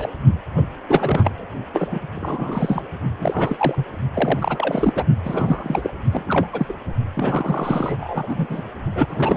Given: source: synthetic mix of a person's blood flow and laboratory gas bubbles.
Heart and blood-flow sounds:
Doppler ultrasound of blood flow; precordium
0.00-0.09 s: bubbles
0.56-0.62 s: bubbles
0.88-1.47 s: bubbles
1.73-1.88 s: bubbles
1.91-2.00 s: bubbles
2.16-2.83 s: bubbles
3.18-3.84 s: bubbles
4.13-5.04 s: bubbles
5.25-5.90 s: bubbles
6.12-6.47 s: bubbles
6.52-6.73 s: bubbles
7.13-8.46 s: bubbles
8.49-8.62 s: bubbles
8.95-9.37 s: bubbles
From the record:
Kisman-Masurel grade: 342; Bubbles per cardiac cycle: rolling drumbeat, 9 or more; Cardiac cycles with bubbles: 100%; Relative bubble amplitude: moderate (0.250 to 0.450); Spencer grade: 3 (all of the cardiac periods contain showers or single bubble signals, but not dominating or overriding the cardiac motion signals); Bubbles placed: only in the low amplitude regions of the cardiac cycle

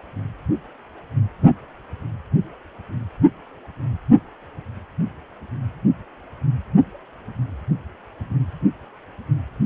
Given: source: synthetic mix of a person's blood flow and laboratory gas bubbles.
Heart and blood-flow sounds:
Doppler ultrasound of blood flow; precordium
no bubbles
From the record:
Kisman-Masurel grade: 000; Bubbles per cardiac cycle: 0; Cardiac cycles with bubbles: 0%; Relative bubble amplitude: no bubbles discernible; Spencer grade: 0 (complete lack of bubble signals)

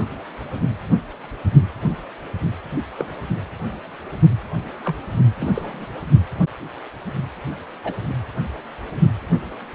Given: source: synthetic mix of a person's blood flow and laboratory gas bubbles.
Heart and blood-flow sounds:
Doppler ultrasound of blood flow; precordium
2.97-3.06 s: bubbles
4.85-4.95 s: bubbles
5.41-5.85 s: bubbles
7.83-7.94 s: bubbles
From the record:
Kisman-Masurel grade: 121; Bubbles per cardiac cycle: 1 to 2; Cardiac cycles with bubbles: 10 to 50%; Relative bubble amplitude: barely perceptible (0.100 to 0.250); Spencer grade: 2 (many but less than half of the cardiac periods contain bubble signals, singularly or in groups); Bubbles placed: anywhere in the cardiac cycle

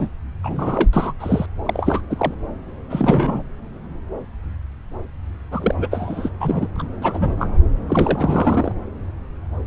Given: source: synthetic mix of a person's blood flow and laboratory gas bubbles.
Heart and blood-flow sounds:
Doppler ultrasound of blood flow; subclavian vein
0.00-0.08 s: bubbles
0.43-0.89 s: bubbles
0.92-1.13 s: bubbles
1.20-1.46 s: bubbles
1.65-2.02 s: bubbles
2.10-2.35 s: bubbles
2.90-3.43 s: bubbles
5.50-5.75 s: bubbles
5.78-5.88 s: bubbles
5.91-6.29 s: bubbles
6.40-6.67 s: bubbles
6.75-6.88 s: bubbles
7.02-7.58 s: bubbles
7.89-8.72 s: bubbles
From the record:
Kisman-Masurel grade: 332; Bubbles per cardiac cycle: rolling drumbeat, 9 or more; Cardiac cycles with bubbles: 50 to 99%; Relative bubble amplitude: moderate (0.250 to 0.450); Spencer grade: 3 (all of the cardiac periods contain showers or single bubble signals, but not dominating or overriding the cardiac motion signals); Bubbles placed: anywhere in the cardiac cycle

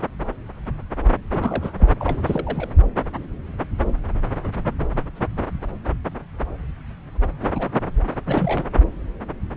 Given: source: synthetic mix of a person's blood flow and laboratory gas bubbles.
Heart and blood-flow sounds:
Doppler ultrasound of blood flow; subclavian vein
1.30-1.74 s: bubbles
1.78-1.88 s: bubbles
2.00-2.21 s: bubbles
2.25-2.70 s: bubbles
7.42-7.49 s: bubbles
7.54-7.79 s: bubbles
8.25-8.68 s: bubbles
From the record:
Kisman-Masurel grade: 221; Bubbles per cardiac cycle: several, 3 to 8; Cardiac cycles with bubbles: 10 to 50%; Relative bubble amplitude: barely perceptible (0.100 to 0.250); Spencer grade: 2 (many but less than half of the cardiac periods contain bubble signals, singularly or in groups); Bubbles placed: anywhere in the cardiac cycle

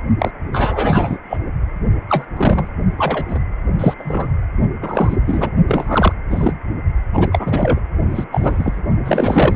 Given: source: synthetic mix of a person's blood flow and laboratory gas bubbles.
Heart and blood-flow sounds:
Doppler ultrasound of blood flow; precordium
0.19-0.31 s: bubbles
0.53-1.18 s: bubbles
1.29-1.38 s: bubbles
2.08-2.25 s: bubbles
2.36-2.68 s: bubbles
2.97-3.39 s: bubbles
3.79-3.94 s: bubbles
3.98-4.32 s: bubbles
4.82-5.17 s: bubbles
5.26-5.50 s: bubbles
5.67-6.13 s: bubbles
6.30-6.53 s: bubbles
7.13-7.80 s: bubbles
8.09-8.24 s: bubbles
8.31-8.80 s: bubbles
9.04-9.56 s: bubbles
From the record:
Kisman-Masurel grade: 243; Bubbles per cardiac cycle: several, 3 to 8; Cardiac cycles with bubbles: 100%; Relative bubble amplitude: loud (0.450 to 0.775); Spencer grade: 3 (all of the cardiac periods contain showers or single bubble signals, but not dominating or overriding the cardiac motion signals); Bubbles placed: only in the low amplitude regions of the cardiac cycle

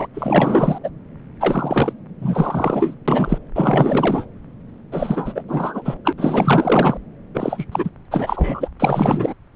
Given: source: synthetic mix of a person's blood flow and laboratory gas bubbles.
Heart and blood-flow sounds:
Doppler ultrasound of blood flow; subclavian vein
0.00-0.07 s: bubbles
0.14-0.78 s: bubbles
0.83-0.90 s: bubbles
1.40-1.93 s: bubbles
2.21-2.95 s: bubbles
3.08-3.38 s: bubbles
3.55-4.26 s: bubbles
4.92-5.44 s: bubbles
5.47-5.95 s: bubbles
6.04-6.13 s: bubbles
6.17-6.97 s: bubbles
7.34-7.64 s: bubbles
7.71-7.89 s: bubbles
8.11-8.70 s: bubbles
8.79-9.33 s: bubbles
From the record:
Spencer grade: 4 (maximum detectable bubble signal sounding continuously throughout systole and diastole of every cardiac period, and overriding the amplitude of the normal cardiac signals); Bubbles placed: anywhere in the cardiac cycle

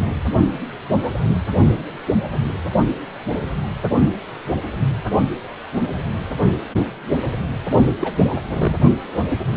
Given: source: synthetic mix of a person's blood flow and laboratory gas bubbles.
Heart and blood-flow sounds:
Doppler ultrasound of blood flow; precordium
7.99-8.12 s: bubbles
8.27-8.41 s: bubbles
8.47-8.76 s: bubbles
From the record:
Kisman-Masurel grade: 212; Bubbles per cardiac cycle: several, 3 to 8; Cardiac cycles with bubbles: 1 to 10%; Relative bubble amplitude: moderate (0.250 to 0.450); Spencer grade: 1 (occasional bubble signal discernible with the cardiac motion signal, with majority of cardiac periods free of bubbles); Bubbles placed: only in the low amplitude regions of the cardiac cycle

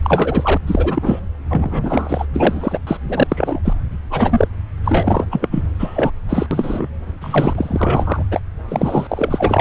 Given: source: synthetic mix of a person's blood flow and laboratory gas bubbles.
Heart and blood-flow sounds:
Doppler ultrasound of blood flow; subclavian vein
0.02-0.57 s: bubbles
0.67-1.20 s: bubbles
1.49-2.25 s: bubbles
2.33-2.79 s: bubbles
2.86-2.97 s: bubbles
3.08-3.59 s: bubbles
3.65-3.73 s: bubbles
4.10-4.47 s: bubbles
4.84-5.26 s: bubbles
5.31-5.48 s: bubbles
5.51-5.68 s: bubbles
5.79-6.11 s: bubbles
6.29-6.46 s: bubbles
6.51-6.88 s: bubbles
7.21-8.23 s: bubbles
8.31-8.40 s: bubbles
8.68-9.61 s: bubbles
From the record:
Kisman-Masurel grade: 343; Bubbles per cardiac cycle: rolling drumbeat, 9 or more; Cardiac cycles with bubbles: 100%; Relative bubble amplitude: loud (0.450 to 0.775); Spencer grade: 3 (all of the cardiac periods contain showers or single bubble signals, but not dominating or overriding the cardiac motion signals); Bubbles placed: anywhere in the cardiac cycle

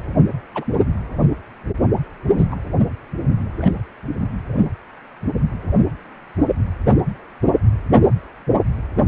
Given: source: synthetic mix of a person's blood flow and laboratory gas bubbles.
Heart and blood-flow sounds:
Doppler ultrasound of blood flow; precordium
0.54-0.64 s: bubbles
2.37-2.46 s: bubbles
2.50-2.56 s: bubbles
3.57-3.71 s: bubbles
From the record:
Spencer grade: 2 (many but less than half of the cardiac periods contain bubble signals, singularly or in groups); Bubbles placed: only in the low amplitude regions of the cardiac cycle

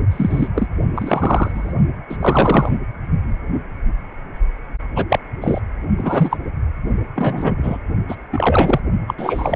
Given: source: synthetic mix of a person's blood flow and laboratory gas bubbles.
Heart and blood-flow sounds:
Doppler ultrasound of blood flow; precordium
0.11-0.48 s: bubbles
0.55-0.67 s: bubbles
0.95-1.73 s: bubbles
2.10-2.79 s: bubbles
4.96-5.05 s: bubbles
5.08-5.19 s: bubbles
5.41-5.60 s: bubbles
5.97-6.37 s: bubbles
7.15-7.77 s: bubbles
8.08-8.15 s: bubbles
8.32-8.80 s: bubbles
9.07-9.14 s: bubbles
9.17-9.56 s: bubbles
From the record:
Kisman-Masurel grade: 233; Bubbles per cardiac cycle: several, 3 to 8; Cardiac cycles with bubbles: 50 to 99%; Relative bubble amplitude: loud (0.450 to 0.775); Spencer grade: 3 (all of the cardiac periods contain showers or single bubble signals, but not dominating or overriding the cardiac motion signals); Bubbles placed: only in the low amplitude regions of the cardiac cycle

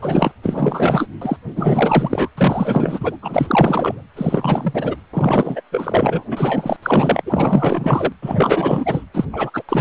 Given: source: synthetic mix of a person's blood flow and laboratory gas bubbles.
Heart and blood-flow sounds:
Doppler ultrasound of blood flow; precordium
0.01-0.32 s: bubbles
0.43-1.06 s: bubbles
1.21-1.36 s: bubbles
1.55-2.29 s: bubbles
2.37-3.17 s: bubbles
3.22-4.03 s: bubbles
4.16-4.96 s: bubbles
5.13-5.61 s: bubbles
5.71-6.23 s: bubbles
6.30-6.76 s: bubbles
6.82-7.21 s: bubbles
7.26-8.12 s: bubbles
8.22-9.04 s: bubbles
9.13-9.25 s: bubbles
9.33-9.51 s: bubbles
9.54-9.62 s: bubbles
9.69-9.81 s: bubbles
From the record:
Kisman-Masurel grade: 444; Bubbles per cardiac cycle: continuous sound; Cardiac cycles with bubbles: 100%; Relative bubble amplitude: maximal (0.775 to 0.999); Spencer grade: 4 (maximum detectable bubble signal sounding continuously throughout systole and diastole of every cardiac period, and overriding the amplitude of the normal cardiac signals); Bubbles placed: anywhere in the cardiac cycle

